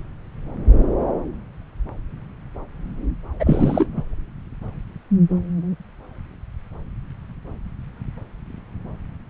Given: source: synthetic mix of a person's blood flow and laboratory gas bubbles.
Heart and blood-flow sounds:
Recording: Doppler ultrasound of blood flow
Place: subclavian vein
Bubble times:
3.40-3.86 s: bubbles
3.96-4.03 s: bubbles
From the record:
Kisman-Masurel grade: 213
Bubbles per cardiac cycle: several, 3 to 8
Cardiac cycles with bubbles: 1 to 10%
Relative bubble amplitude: loud (0.450 to 0.775)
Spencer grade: 1 (occasional bubble signal discernible with the cardiac motion signal, with majority of cardiac periods free of bubbles)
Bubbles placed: anywhere in the cardiac cycle

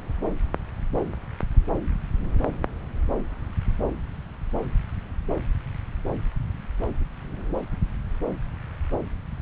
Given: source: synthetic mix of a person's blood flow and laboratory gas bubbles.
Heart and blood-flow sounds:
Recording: Doppler ultrasound of blood flow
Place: subclavian vein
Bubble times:
no bubbles
From the record:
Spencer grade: 0 (complete lack of bubble signals)

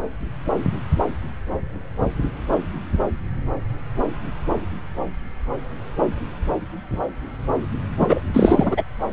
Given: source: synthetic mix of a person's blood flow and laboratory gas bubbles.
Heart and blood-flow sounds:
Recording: Doppler ultrasound of blood flow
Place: subclavian vein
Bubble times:
8.00-8.21 s: bubbles
8.33-8.83 s: bubbles
From the record:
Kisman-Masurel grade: 223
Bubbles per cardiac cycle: several, 3 to 8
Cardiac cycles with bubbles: 10 to 50%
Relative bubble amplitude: loud (0.450 to 0.775)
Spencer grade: 2 (many but less than half of the cardiac periods contain bubble signals, singularly or in groups)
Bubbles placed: anywhere in the cardiac cycle

